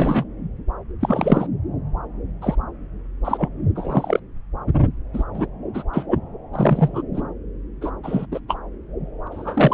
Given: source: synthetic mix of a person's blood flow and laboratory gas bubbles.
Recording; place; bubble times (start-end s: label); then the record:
Doppler ultrasound of blood flow; subclavian vein
0.00-0.25 s: bubbles
1.01-1.47 s: bubbles
2.41-2.55 s: bubbles
3.24-3.48 s: bubbles
3.75-4.20 s: bubbles
5.13-5.24 s: bubbles
5.33-5.46 s: bubbles
5.74-5.83 s: bubbles
5.93-6.06 s: bubbles
6.11-6.19 s: bubbles
6.52-7.02 s: bubbles
7.14-7.22 s: bubbles
7.81-7.92 s: bubbles
8.03-8.26 s: bubbles
8.31-8.39 s: bubbles
8.48-8.56 s: bubbles
9.31-9.74 s: bubbles
From the record:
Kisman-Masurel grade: 243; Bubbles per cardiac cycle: several, 3 to 8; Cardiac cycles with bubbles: 100%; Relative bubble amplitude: loud (0.450 to 0.775); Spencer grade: 3 (all of the cardiac periods contain showers or single bubble signals, but not dominating or overriding the cardiac motion signals); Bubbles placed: anywhere in the cardiac cycle